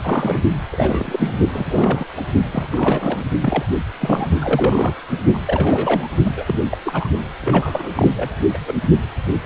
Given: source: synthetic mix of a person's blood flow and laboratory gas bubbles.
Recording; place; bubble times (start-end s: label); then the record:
Doppler ultrasound of blood flow; precordium
0.02-0.40 s: bubbles
0.71-1.33 s: bubbles
1.52-2.05 s: bubbles
2.17-2.22 s: bubbles
2.52-3.25 s: bubbles
3.42-3.65 s: bubbles
4.00-4.29 s: bubbles
4.41-4.93 s: bubbles
5.10-5.19 s: bubbles
5.33-5.39 s: bubbles
5.46-6.08 s: bubbles
6.24-6.59 s: bubbles
6.66-6.78 s: bubbles
6.85-7.08 s: bubbles
7.41-7.89 s: bubbles
7.96-8.08 s: bubbles
8.13-8.37 s: bubbles
8.54-8.58 s: bubbles
8.67-8.73 s: bubbles
From the record:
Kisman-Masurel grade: 332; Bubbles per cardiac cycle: rolling drumbeat, 9 or more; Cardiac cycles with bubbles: 50 to 99%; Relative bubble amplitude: moderate (0.250 to 0.450); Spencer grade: 3 (all of the cardiac periods contain showers or single bubble signals, but not dominating or overriding the cardiac motion signals); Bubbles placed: only in the low amplitude regions of the cardiac cycle